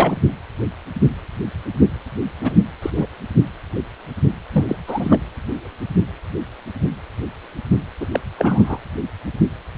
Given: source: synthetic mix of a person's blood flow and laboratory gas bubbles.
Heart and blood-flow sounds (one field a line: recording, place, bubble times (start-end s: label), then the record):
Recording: Doppler ultrasound of blood flow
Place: precordium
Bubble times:
0.00-0.17 s: bubbles
2.42-2.57 s: bubbles
2.82-2.90 s: bubbles
2.94-3.06 s: bubbles
4.52-4.64 s: bubbles
4.67-4.76 s: bubbles
4.87-5.18 s: bubbles
8.00-8.07 s: bubbles
8.12-8.20 s: bubbles
8.37-8.79 s: bubbles
From the record:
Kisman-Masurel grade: 222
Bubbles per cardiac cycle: several, 3 to 8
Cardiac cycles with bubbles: 10 to 50%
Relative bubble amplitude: moderate (0.250 to 0.450)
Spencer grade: 2 (many but less than half of the cardiac periods contain bubble signals, singularly or in groups)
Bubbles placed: anywhere in the cardiac cycle